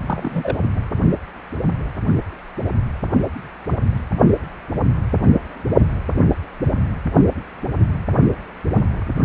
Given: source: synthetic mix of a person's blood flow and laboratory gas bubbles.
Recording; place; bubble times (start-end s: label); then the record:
Doppler ultrasound of blood flow; precordium
0.07-0.57 s: bubbles
From the record:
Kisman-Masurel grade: 112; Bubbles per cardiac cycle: 1 to 2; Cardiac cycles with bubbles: 1 to 10%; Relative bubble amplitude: moderate (0.250 to 0.450); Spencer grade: 1 (occasional bubble signal discernible with the cardiac motion signal, with majority of cardiac periods free of bubbles); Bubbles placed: only in the low amplitude regions of the cardiac cycle